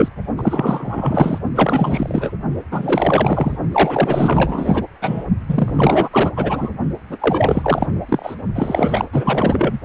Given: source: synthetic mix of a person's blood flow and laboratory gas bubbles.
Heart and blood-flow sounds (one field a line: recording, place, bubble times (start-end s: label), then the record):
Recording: Doppler ultrasound of blood flow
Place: precordium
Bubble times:
0.00-0.08 s: bubbles
0.37-1.38 s: bubbles
1.54-2.32 s: bubbles
2.71-3.58 s: bubbles
3.71-4.86 s: bubbles
5.01-5.25 s: bubbles
5.48-6.33 s: bubbles
6.37-6.70 s: bubbles
7.09-8.03 s: bubbles
8.08-8.35 s: bubbles
8.54-9.09 s: bubbles
9.12-9.79 s: bubbles
From the record:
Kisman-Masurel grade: 444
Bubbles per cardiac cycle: continuous sound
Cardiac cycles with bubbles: 100%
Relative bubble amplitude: maximal (0.775 to 0.999)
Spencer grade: 4 (maximum detectable bubble signal sounding continuously throughout systole and diastole of every cardiac period, and overriding the amplitude of the normal cardiac signals)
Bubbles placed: only in the low amplitude regions of the cardiac cycle